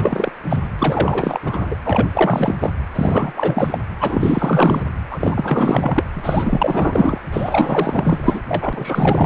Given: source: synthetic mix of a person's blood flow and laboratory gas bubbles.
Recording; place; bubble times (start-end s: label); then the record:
Doppler ultrasound of blood flow; precordium
0.00-0.31 s: bubbles
0.47-0.68 s: bubbles
0.78-1.40 s: bubbles
1.42-1.75 s: bubbles
1.84-2.08 s: bubbles
2.13-2.55 s: bubbles
2.60-2.70 s: bubbles
2.94-3.33 s: bubbles
3.35-3.78 s: bubbles
3.99-4.83 s: bubbles
5.11-6.04 s: bubbles
6.14-7.18 s: bubbles
7.32-8.41 s: bubbles
8.48-9.26 s: bubbles
From the record:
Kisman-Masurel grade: 444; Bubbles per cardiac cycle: continuous sound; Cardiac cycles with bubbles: 100%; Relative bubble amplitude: maximal (0.775 to 0.999); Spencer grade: 4 (maximum detectable bubble signal sounding continuously throughout systole and diastole of every cardiac period, and overriding the amplitude of the normal cardiac signals); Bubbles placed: anywhere in the cardiac cycle